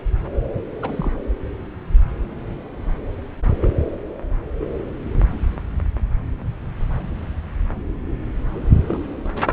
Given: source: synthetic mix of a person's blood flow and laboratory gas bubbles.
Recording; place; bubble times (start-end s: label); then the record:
Doppler ultrasound of blood flow; subclavian vein
0.82-1.11 s: bubbles
3.61-3.71 s: bubbles
4.59-4.70 s: bubbles
8.88-8.98 s: bubbles
From the record:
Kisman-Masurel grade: 121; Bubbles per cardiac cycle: 1 to 2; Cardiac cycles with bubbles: 10 to 50%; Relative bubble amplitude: barely perceptible (0.100 to 0.250); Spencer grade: 2 (many but less than half of the cardiac periods contain bubble signals, singularly or in groups); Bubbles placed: anywhere in the cardiac cycle